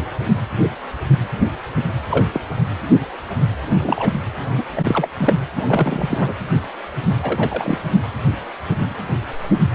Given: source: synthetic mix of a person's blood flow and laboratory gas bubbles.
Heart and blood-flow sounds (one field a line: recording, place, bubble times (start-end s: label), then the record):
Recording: Doppler ultrasound of blood flow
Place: precordium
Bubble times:
2.10-2.26 s: bubbles
2.32-2.41 s: bubbles
3.80-4.10 s: bubbles
4.57-4.63 s: bubbles
4.76-5.08 s: bubbles
5.18-5.35 s: bubbles
5.56-6.34 s: bubbles
7.22-7.78 s: bubbles
From the record:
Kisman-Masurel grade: 222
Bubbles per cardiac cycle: several, 3 to 8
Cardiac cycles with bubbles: 10 to 50%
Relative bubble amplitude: moderate (0.250 to 0.450)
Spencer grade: 2 (many but less than half of the cardiac periods contain bubble signals, singularly or in groups)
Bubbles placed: anywhere in the cardiac cycle